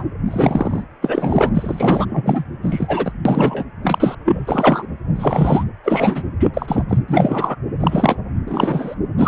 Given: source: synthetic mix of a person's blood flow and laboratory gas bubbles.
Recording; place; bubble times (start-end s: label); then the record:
Doppler ultrasound of blood flow; precordium
0.00-0.04 s: bubbles
0.26-0.83 s: bubbles
1.01-1.49 s: bubbles
1.54-2.06 s: bubbles
2.09-2.44 s: bubbles
2.62-3.12 s: bubbles
3.25-3.64 s: bubbles
3.83-4.15 s: bubbles
4.25-4.86 s: bubbles
5.15-5.64 s: bubbles
5.83-6.22 s: bubbles
6.39-6.50 s: bubbles
6.54-6.85 s: bubbles
6.88-6.98 s: bubbles
7.08-7.55 s: bubbles
7.80-8.18 s: bubbles
8.47-8.95 s: bubbles
9.18-9.28 s: bubbles
From the record:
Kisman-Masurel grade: 243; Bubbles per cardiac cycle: several, 3 to 8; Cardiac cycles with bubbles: 100%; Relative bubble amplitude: loud (0.450 to 0.775); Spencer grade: 3 (all of the cardiac periods contain showers or single bubble signals, but not dominating or overriding the cardiac motion signals); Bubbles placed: anywhere in the cardiac cycle